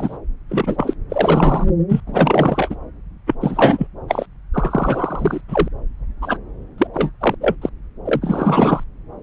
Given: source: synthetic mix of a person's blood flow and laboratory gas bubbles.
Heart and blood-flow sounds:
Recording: Doppler ultrasound of blood flow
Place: subclavian vein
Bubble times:
0.00-0.17 s: bubbles
0.49-0.96 s: bubbles
1.08-1.64 s: bubbles
1.89-2.00 s: bubbles
2.07-2.75 s: bubbles
3.26-3.34 s: bubbles
3.41-3.87 s: bubbles
4.08-4.26 s: bubbles
4.52-5.41 s: bubbles
5.48-5.68 s: bubbles
6.21-6.38 s: bubbles
6.78-6.87 s: bubbles
6.93-7.11 s: bubbles
7.21-7.35 s: bubbles
7.40-7.55 s: bubbles
7.61-7.69 s: bubbles
8.05-8.84 s: bubbles
From the record:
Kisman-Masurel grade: 343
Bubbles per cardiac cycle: rolling drumbeat, 9 or more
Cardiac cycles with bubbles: 100%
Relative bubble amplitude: loud (0.450 to 0.775)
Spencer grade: 3 (all of the cardiac periods contain showers or single bubble signals, but not dominating or overriding the cardiac motion signals)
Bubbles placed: anywhere in the cardiac cycle

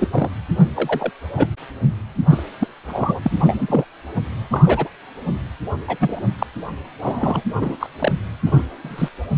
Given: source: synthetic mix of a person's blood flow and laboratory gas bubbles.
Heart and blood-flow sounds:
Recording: Doppler ultrasound of blood flow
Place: precordium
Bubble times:
0.00-0.08 s: bubbles
0.12-0.29 s: bubbles
0.76-1.10 s: bubbles
1.37-1.47 s: bubbles
2.29-2.43 s: bubbles
2.60-2.68 s: bubbles
2.88-3.20 s: bubbles
3.23-3.31 s: bubbles
3.40-3.85 s: bubbles
4.50-4.89 s: bubbles
5.87-5.97 s: bubbles
6.00-6.22 s: bubbles
6.38-6.46 s: bubbles
7.01-7.42 s: bubbles
7.53-7.76 s: bubbles
7.79-7.87 s: bubbles
7.99-8.12 s: bubbles
8.46-8.63 s: bubbles
8.84-9.09 s: bubbles
From the record:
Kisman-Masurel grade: 242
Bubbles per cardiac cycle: several, 3 to 8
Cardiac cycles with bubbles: 100%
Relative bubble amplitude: moderate (0.250 to 0.450)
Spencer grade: 3 (all of the cardiac periods contain showers or single bubble signals, but not dominating or overriding the cardiac motion signals)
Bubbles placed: anywhere in the cardiac cycle

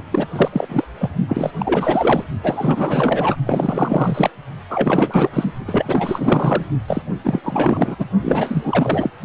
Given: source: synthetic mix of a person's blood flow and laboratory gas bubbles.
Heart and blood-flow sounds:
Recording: Doppler ultrasound of blood flow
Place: precordium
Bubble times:
0.10-0.28 s: bubbles
0.31-0.49 s: bubbles
0.52-0.84 s: bubbles
0.99-1.09 s: bubbles
1.28-1.51 s: bubbles
1.59-2.24 s: bubbles
2.42-3.36 s: bubbles
3.46-4.30 s: bubbles
4.69-5.52 s: bubbles
5.67-6.66 s: bubbles
6.87-7.02 s: bubbles
7.23-7.40 s: bubbles
7.43-7.95 s: bubbles
7.98-8.08 s: bubbles
8.21-9.11 s: bubbles
From the record:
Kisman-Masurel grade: 444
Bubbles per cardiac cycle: continuous sound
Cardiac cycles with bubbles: 100%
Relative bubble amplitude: maximal (0.775 to 0.999)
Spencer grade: 4 (maximum detectable bubble signal sounding continuously throughout systole and diastole of every cardiac period, and overriding the amplitude of the normal cardiac signals)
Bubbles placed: only in the low amplitude regions of the cardiac cycle

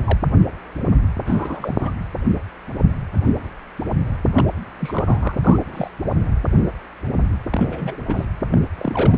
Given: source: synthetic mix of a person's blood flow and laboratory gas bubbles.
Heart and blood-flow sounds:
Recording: Doppler ultrasound of blood flow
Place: precordium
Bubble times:
0.04-0.18 s: bubbles
1.26-1.75 s: bubbles
1.79-1.92 s: bubbles
4.34-4.43 s: bubbles
4.80-5.38 s: bubbles
5.42-5.59 s: bubbles
5.72-5.90 s: bubbles
7.50-7.98 s: bubbles
8.08-8.27 s: bubbles
8.51-8.61 s: bubbles
8.77-9.18 s: bubbles
From the record:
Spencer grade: 3 (all of the cardiac periods contain showers or single bubble signals, but not dominating or overriding the cardiac motion signals)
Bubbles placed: anywhere in the cardiac cycle

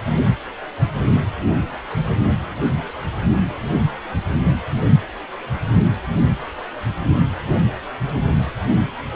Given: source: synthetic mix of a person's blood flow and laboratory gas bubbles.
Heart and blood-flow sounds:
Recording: Doppler ultrasound of blood flow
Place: precordium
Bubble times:
no bubbles
From the record:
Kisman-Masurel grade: 000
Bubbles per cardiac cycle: 0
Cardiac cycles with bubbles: 0%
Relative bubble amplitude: no bubbles discernible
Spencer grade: 0 (complete lack of bubble signals)

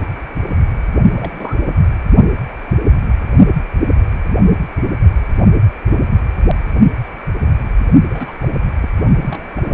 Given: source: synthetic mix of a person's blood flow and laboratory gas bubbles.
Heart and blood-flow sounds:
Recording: Doppler ultrasound of blood flow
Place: precordium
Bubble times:
1.16-1.75 s: bubbles
8.09-8.32 s: bubbles
8.38-8.49 s: bubbles
8.82-8.88 s: bubbles
9.22-9.49 s: bubbles
9.56-9.72 s: bubbles
From the record:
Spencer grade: 2 (many but less than half of the cardiac periods contain bubble signals, singularly or in groups)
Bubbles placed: only in the low amplitude regions of the cardiac cycle

